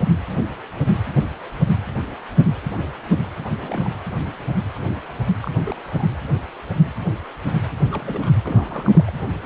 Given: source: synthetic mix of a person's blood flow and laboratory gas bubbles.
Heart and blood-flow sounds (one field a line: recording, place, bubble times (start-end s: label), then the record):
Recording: Doppler ultrasound of blood flow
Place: precordium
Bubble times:
3.49-3.95 s: bubbles
5.40-5.51 s: bubbles
5.67-5.77 s: bubbles
5.88-6.07 s: bubbles
7.73-8.32 s: bubbles
8.43-9.11 s: bubbles
From the record:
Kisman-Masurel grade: 221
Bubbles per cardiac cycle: several, 3 to 8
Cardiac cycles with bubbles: 10 to 50%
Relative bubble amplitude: barely perceptible (0.100 to 0.250)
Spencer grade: 2 (many but less than half of the cardiac periods contain bubble signals, singularly or in groups)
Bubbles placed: anywhere in the cardiac cycle